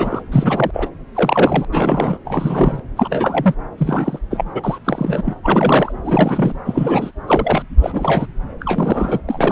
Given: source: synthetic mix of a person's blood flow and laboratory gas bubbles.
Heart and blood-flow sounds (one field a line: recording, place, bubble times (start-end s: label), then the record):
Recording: Doppler ultrasound of blood flow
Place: subclavian vein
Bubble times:
0.00-0.22 s: bubbles
0.32-0.88 s: bubbles
1.14-1.66 s: bubbles
1.71-2.19 s: bubbles
2.25-2.80 s: bubbles
2.97-3.54 s: bubbles
3.77-4.19 s: bubbles
4.30-4.44 s: bubbles
4.54-4.78 s: bubbles
4.84-5.33 s: bubbles
5.43-5.92 s: bubbles
6.04-6.53 s: bubbles
6.64-7.11 s: bubbles
7.27-7.62 s: bubbles
7.81-8.27 s: bubbles
8.60-9.20 s: bubbles
9.28-9.52 s: bubbles
From the record:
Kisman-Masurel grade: 342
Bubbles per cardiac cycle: rolling drumbeat, 9 or more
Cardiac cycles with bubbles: 100%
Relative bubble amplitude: moderate (0.250 to 0.450)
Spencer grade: 3 (all of the cardiac periods contain showers or single bubble signals, but not dominating or overriding the cardiac motion signals)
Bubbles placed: anywhere in the cardiac cycle